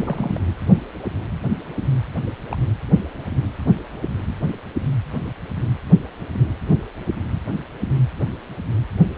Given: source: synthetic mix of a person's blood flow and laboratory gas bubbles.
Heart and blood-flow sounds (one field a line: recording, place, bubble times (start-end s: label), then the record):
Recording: Doppler ultrasound of blood flow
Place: precordium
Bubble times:
0.00-0.38 s: bubbles
2.50-2.58 s: bubbles
From the record:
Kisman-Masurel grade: 111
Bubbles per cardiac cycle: 1 to 2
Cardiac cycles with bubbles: 1 to 10%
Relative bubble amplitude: barely perceptible (0.100 to 0.250)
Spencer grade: 1 (occasional bubble signal discernible with the cardiac motion signal, with majority of cardiac periods free of bubbles)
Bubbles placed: anywhere in the cardiac cycle